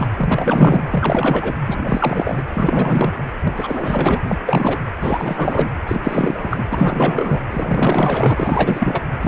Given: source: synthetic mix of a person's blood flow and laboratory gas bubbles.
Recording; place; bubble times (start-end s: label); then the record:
Doppler ultrasound of blood flow; precordium
0.00-0.07 s: bubbles
0.17-0.83 s: bubbles
0.86-1.54 s: bubbles
1.67-2.42 s: bubbles
2.48-3.12 s: bubbles
3.43-3.53 s: bubbles
3.55-4.21 s: bubbles
4.28-4.39 s: bubbles
4.46-4.77 s: bubbles
5.00-5.71 s: bubbles
5.88-6.00 s: bubbles
6.03-7.42 s: bubbles
7.51-9.04 s: bubbles
9.21-9.28 s: bubbles
From the record:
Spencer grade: 4 (maximum detectable bubble signal sounding continuously throughout systole and diastole of every cardiac period, and overriding the amplitude of the normal cardiac signals); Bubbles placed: anywhere in the cardiac cycle